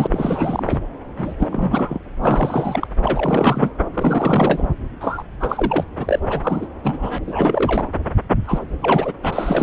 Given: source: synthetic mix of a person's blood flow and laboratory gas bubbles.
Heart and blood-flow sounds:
Doppler ultrasound of blood flow; subclavian vein
0.00-0.07 s: bubbles
0.11-0.79 s: bubbles
1.18-1.33 s: bubbles
1.39-2.00 s: bubbles
2.22-2.87 s: bubbles
3.03-3.70 s: bubbles
3.94-4.68 s: bubbles
5.00-5.23 s: bubbles
5.40-5.84 s: bubbles
5.98-6.19 s: bubbles
6.29-6.41 s: bubbles
6.43-6.67 s: bubbles
6.84-7.19 s: bubbles
7.27-7.88 s: bubbles
8.44-8.63 s: bubbles
8.82-9.13 s: bubbles
9.22-9.63 s: bubbles
From the record:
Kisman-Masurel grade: 342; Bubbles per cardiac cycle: rolling drumbeat, 9 or more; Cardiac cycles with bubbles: 100%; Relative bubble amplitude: moderate (0.250 to 0.450); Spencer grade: 3 (all of the cardiac periods contain showers or single bubble signals, but not dominating or overriding the cardiac motion signals); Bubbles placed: anywhere in the cardiac cycle

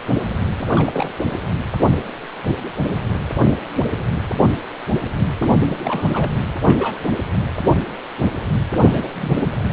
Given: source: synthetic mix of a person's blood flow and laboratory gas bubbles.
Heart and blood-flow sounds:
Doppler ultrasound of blood flow; precordium
0.59-0.67 s: bubbles
0.74-1.11 s: bubbles
5.39-5.50 s: bubbles
5.68-5.78 s: bubbles
5.81-6.32 s: bubbles
6.64-7.00 s: bubbles
8.88-9.09 s: bubbles
9.15-9.52 s: bubbles
9.71-9.73 s: bubbles
From the record:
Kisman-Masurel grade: 221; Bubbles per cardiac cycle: several, 3 to 8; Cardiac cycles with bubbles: 10 to 50%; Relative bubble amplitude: barely perceptible (0.100 to 0.250); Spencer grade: 2 (many but less than half of the cardiac periods contain bubble signals, singularly or in groups); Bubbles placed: anywhere in the cardiac cycle

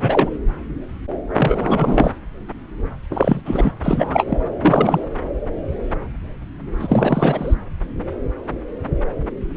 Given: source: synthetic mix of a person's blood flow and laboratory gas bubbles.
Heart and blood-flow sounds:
Doppler ultrasound of blood flow; subclavian vein
0.01-0.30 s: bubbles
1.36-2.11 s: bubbles
3.10-3.42 s: bubbles
3.45-3.72 s: bubbles
3.83-4.25 s: bubbles
4.29-4.38 s: bubbles
4.61-5.06 s: bubbles
6.79-7.54 s: bubbles
From the record:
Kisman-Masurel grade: 333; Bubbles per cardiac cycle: rolling drumbeat, 9 or more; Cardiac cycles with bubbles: 50 to 99%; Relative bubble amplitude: loud (0.450 to 0.775); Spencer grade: 3 (all of the cardiac periods contain showers or single bubble signals, but not dominating or overriding the cardiac motion signals); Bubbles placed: anywhere in the cardiac cycle

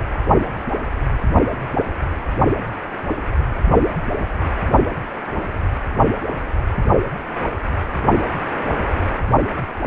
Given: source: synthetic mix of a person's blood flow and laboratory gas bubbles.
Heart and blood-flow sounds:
Doppler ultrasound of blood flow; precordium
no bubbles
From the record:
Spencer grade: 0 (complete lack of bubble signals)

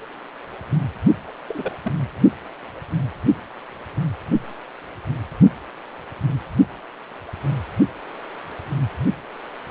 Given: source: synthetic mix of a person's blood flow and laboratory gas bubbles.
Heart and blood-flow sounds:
Doppler ultrasound of blood flow; precordium
1.28-1.32 s: bubbles
1.48-1.72 s: bubbles
1.84-1.92 s: bubbles
From the record:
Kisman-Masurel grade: 211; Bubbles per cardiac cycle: several, 3 to 8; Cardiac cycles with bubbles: 1 to 10%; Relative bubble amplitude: barely perceptible (0.100 to 0.250); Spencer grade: 1 (occasional bubble signal discernible with the cardiac motion signal, with majority of cardiac periods free of bubbles); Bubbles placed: only in the low amplitude regions of the cardiac cycle

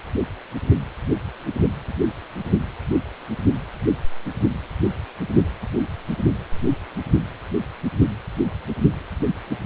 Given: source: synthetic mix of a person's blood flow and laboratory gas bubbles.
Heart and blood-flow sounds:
Doppler ultrasound of blood flow; precordium
no bubbles
From the record:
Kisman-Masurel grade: 000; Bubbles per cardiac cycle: 0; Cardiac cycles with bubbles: 0%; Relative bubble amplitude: no bubbles discernible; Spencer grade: 0 (complete lack of bubble signals)

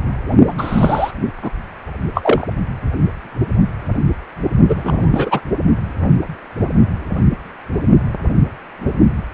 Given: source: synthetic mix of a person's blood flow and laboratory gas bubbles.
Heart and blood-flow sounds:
Doppler ultrasound of blood flow; precordium
0.47-1.11 s: bubbles
1.42-1.51 s: bubbles
2.15-2.46 s: bubbles
4.68-5.41 s: bubbles
From the record:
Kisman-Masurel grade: 223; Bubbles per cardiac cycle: several, 3 to 8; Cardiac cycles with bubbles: 10 to 50%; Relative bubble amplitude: loud (0.450 to 0.775); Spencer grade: 2 (many but less than half of the cardiac periods contain bubble signals, singularly or in groups); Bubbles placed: only in the low amplitude regions of the cardiac cycle

